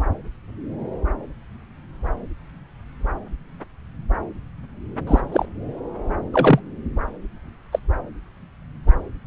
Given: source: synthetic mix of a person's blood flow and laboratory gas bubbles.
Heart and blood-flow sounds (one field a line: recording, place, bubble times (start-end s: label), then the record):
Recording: Doppler ultrasound of blood flow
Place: subclavian vein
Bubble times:
5.07-5.21 s: bubbles
5.32-5.46 s: bubbles
6.33-6.60 s: bubbles
7.72-7.79 s: bubbles
From the record:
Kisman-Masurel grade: 122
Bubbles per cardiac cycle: 1 to 2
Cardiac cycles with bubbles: 10 to 50%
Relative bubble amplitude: moderate (0.250 to 0.450)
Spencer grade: 2 (many but less than half of the cardiac periods contain bubble signals, singularly or in groups)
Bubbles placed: anywhere in the cardiac cycle